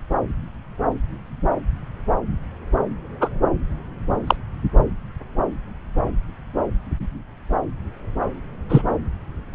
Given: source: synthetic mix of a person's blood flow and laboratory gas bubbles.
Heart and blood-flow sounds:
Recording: Doppler ultrasound of blood flow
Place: subclavian vein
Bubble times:
3.21-3.29 s: bubbles
4.27-4.36 s: bubbles
8.69-8.81 s: bubbles
From the record:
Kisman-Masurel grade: 123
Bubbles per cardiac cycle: 1 to 2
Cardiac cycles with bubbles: 10 to 50%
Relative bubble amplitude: loud (0.450 to 0.775)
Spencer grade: 2 (many but less than half of the cardiac periods contain bubble signals, singularly or in groups)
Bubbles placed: anywhere in the cardiac cycle

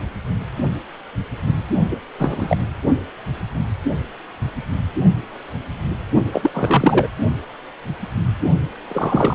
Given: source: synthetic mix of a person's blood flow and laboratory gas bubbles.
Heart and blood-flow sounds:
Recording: Doppler ultrasound of blood flow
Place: precordium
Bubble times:
1.89-1.97 s: bubbles
2.19-2.57 s: bubbles
6.32-6.51 s: bubbles
6.54-7.08 s: bubbles
8.88-9.34 s: bubbles
From the record:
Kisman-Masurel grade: 223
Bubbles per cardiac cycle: several, 3 to 8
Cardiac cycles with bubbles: 10 to 50%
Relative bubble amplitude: loud (0.450 to 0.775)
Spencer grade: 2 (many but less than half of the cardiac periods contain bubble signals, singularly or in groups)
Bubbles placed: only in the low amplitude regions of the cardiac cycle

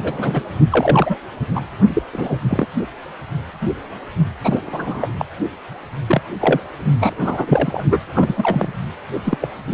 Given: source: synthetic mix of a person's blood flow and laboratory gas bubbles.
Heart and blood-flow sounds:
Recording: Doppler ultrasound of blood flow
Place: precordium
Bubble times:
0.03-0.42 s: bubbles
0.71-1.15 s: bubbles
1.54-1.61 s: bubbles
1.94-2.03 s: bubbles
2.12-2.37 s: bubbles
2.50-2.67 s: bubbles
4.41-4.61 s: bubbles
4.67-5.10 s: bubbles
5.19-5.25 s: bubbles
6.07-6.21 s: bubbles
6.41-6.61 s: bubbles
7.00-7.14 s: bubbles
7.20-7.85 s: bubbles
7.91-8.00 s: bubbles
8.14-8.69 s: bubbles
9.13-9.20 s: bubbles
9.26-9.38 s: bubbles
9.42-9.47 s: bubbles
From the record:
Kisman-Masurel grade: 232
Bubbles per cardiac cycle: several, 3 to 8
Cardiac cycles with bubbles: 50 to 99%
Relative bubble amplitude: moderate (0.250 to 0.450)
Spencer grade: 3 (all of the cardiac periods contain showers or single bubble signals, but not dominating or overriding the cardiac motion signals)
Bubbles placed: only in the low amplitude regions of the cardiac cycle

